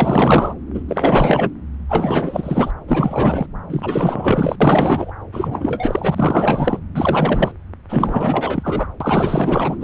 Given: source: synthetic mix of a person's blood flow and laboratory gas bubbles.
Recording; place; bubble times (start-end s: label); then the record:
Doppler ultrasound of blood flow; subclavian vein
0.00-0.54 s: bubbles
0.74-0.82 s: bubbles
0.89-1.50 s: bubbles
1.89-2.71 s: bubbles
2.88-3.46 s: bubbles
3.70-4.56 s: bubbles
4.61-5.12 s: bubbles
5.32-6.80 s: bubbles
6.95-7.52 s: bubbles
7.89-8.87 s: bubbles
9.00-9.77 s: bubbles
9.80-9.84 s: bubbles
From the record:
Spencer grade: 4 (maximum detectable bubble signal sounding continuously throughout systole and diastole of every cardiac period, and overriding the amplitude of the normal cardiac signals); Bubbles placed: anywhere in the cardiac cycle